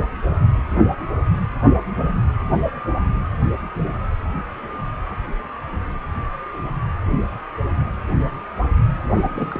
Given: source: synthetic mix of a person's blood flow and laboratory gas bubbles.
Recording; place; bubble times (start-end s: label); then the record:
Doppler ultrasound of blood flow; precordium
9.06-9.60 s: bubbles
From the record:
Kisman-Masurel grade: 211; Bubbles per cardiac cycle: several, 3 to 8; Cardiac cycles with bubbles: 1 to 10%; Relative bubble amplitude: barely perceptible (0.100 to 0.250); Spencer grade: 1 (occasional bubble signal discernible with the cardiac motion signal, with majority of cardiac periods free of bubbles); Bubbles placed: anywhere in the cardiac cycle